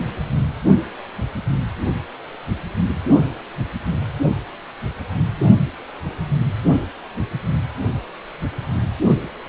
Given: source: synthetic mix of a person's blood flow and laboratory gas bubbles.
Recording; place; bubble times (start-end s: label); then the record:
Doppler ultrasound of blood flow; precordium
0.00-0.05 s: bubbles
From the record:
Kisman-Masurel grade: 112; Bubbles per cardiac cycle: 1 to 2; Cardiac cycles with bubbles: 1 to 10%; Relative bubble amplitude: moderate (0.250 to 0.450); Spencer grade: 1 (occasional bubble signal discernible with the cardiac motion signal, with majority of cardiac periods free of bubbles); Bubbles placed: anywhere in the cardiac cycle